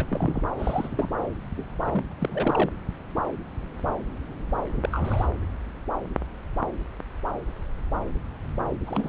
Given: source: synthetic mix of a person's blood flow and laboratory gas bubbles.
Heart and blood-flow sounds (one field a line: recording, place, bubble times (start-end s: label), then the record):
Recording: Doppler ultrasound of blood flow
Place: subclavian vein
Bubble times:
0.00-0.06 s: bubbles
0.09-0.43 s: bubbles
0.58-1.08 s: bubbles
1.57-1.65 s: bubbles
1.67-2.04 s: bubbles
2.11-2.14 s: bubbles
2.20-2.70 s: bubbles
4.75-5.27 s: bubbles
8.87-9.09 s: bubbles
From the record:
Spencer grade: 2 (many but less than half of the cardiac periods contain bubble signals, singularly or in groups)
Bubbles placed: anywhere in the cardiac cycle